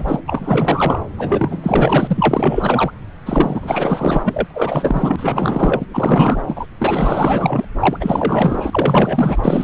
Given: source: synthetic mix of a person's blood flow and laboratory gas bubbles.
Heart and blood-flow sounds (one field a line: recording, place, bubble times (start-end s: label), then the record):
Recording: Doppler ultrasound of blood flow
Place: subclavian vein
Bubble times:
0.00-0.20 s: bubbles
0.28-0.99 s: bubbles
1.18-2.91 s: bubbles
3.26-4.47 s: bubbles
4.50-5.86 s: bubbles
5.93-6.41 s: bubbles
6.47-6.66 s: bubbles
6.79-7.65 s: bubbles
7.79-7.97 s: bubbles
8.00-9.64 s: bubbles
From the record:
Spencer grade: 4 (maximum detectable bubble signal sounding continuously throughout systole and diastole of every cardiac period, and overriding the amplitude of the normal cardiac signals)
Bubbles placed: anywhere in the cardiac cycle